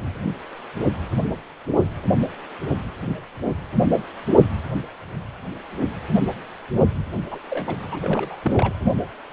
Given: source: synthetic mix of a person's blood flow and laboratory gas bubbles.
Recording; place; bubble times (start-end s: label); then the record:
Doppler ultrasound of blood flow; precordium
7.30-7.40 s: bubbles
7.50-7.75 s: bubbles
7.91-8.38 s: bubbles
8.42-8.73 s: bubbles
From the record:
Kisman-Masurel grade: 222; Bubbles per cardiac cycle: several, 3 to 8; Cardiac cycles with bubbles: 10 to 50%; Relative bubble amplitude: moderate (0.250 to 0.450); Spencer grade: 2 (many but less than half of the cardiac periods contain bubble signals, singularly or in groups); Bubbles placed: anywhere in the cardiac cycle